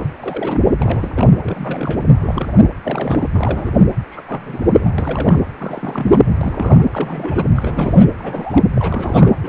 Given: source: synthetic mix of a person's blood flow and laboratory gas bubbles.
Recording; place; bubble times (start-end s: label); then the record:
Doppler ultrasound of blood flow; precordium
0.00-0.06 s: bubbles
0.18-0.73 s: bubbles
0.78-1.11 s: bubbles
1.15-1.27 s: bubbles
1.44-2.01 s: bubbles
2.19-2.68 s: bubbles
2.84-3.29 s: bubbles
3.33-3.80 s: bubbles
4.10-4.21 s: bubbles
4.27-4.91 s: bubbles
4.98-5.42 s: bubbles
5.58-6.21 s: bubbles
6.26-6.31 s: bubbles
6.41-6.85 s: bubbles
6.92-7.45 s: bubbles
7.55-8.06 s: bubbles
8.19-8.66 s: bubbles
8.74-9.34 s: bubbles
9.43-9.49 s: bubbles
From the record:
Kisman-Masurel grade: 332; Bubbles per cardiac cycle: rolling drumbeat, 9 or more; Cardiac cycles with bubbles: 50 to 99%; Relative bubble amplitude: moderate (0.250 to 0.450); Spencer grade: 3 (all of the cardiac periods contain showers or single bubble signals, but not dominating or overriding the cardiac motion signals); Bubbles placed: anywhere in the cardiac cycle